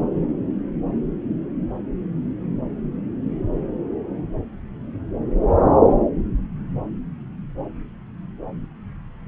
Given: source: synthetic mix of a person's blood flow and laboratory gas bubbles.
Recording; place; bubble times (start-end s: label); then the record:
Doppler ultrasound of blood flow; subclavian vein
no bubbles
From the record:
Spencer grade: 0 (complete lack of bubble signals)